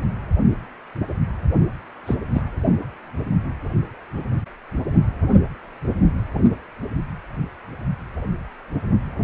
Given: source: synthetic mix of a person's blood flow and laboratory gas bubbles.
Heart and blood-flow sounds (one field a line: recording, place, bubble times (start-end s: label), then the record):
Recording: Doppler ultrasound of blood flow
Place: precordium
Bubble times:
2.06-2.16 s: bubbles
2.34-2.42 s: bubbles
From the record:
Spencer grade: 2 (many but less than half of the cardiac periods contain bubble signals, singularly or in groups)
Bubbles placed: only in the low amplitude regions of the cardiac cycle